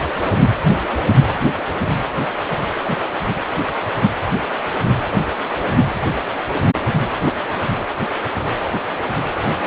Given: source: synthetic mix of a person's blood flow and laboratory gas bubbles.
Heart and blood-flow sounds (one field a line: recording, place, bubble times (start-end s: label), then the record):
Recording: Doppler ultrasound of blood flow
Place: precordium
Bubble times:
no bubbles
From the record:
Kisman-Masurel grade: 000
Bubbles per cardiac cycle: 0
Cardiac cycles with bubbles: 0%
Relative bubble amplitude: no bubbles discernible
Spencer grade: 0 (complete lack of bubble signals)